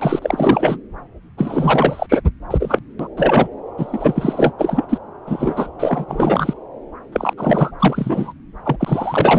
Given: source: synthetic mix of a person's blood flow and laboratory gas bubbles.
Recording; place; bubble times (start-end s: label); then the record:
Doppler ultrasound of blood flow; subclavian vein
0.00-0.19 s: bubbles
0.22-0.79 s: bubbles
1.37-2.21 s: bubbles
2.50-2.80 s: bubbles
2.99-3.07 s: bubbles
3.17-3.50 s: bubbles
3.78-4.53 s: bubbles
4.58-4.85 s: bubbles
4.88-4.98 s: bubbles
5.26-5.70 s: bubbles
5.79-6.05 s: bubbles
6.08-6.54 s: bubbles
7.12-7.33 s: bubbles
7.37-7.71 s: bubbles
7.79-8.33 s: bubbles
8.65-8.76 s: bubbles
8.79-9.39 s: bubbles
From the record:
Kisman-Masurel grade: 444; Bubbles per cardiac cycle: continuous sound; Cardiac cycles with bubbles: 100%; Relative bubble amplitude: maximal (0.775 to 0.999); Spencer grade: 4 (maximum detectable bubble signal sounding continuously throughout systole and diastole of every cardiac period, and overriding the amplitude of the normal cardiac signals); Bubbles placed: anywhere in the cardiac cycle